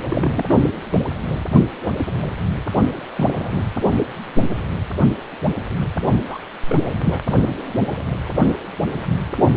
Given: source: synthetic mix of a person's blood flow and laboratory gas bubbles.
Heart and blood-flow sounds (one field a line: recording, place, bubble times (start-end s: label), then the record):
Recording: Doppler ultrasound of blood flow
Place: precordium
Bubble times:
0.10-0.45 s: bubbles
0.48-0.59 s: bubbles
0.91-0.98 s: bubbles
3.16-3.72 s: bubbles
6.27-6.38 s: bubbles
6.68-6.88 s: bubbles
7.03-7.19 s: bubbles
From the record:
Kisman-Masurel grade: 222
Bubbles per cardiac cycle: several, 3 to 8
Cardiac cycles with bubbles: 10 to 50%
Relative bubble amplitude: moderate (0.250 to 0.450)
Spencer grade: 2 (many but less than half of the cardiac periods contain bubble signals, singularly or in groups)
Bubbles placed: only in the low amplitude regions of the cardiac cycle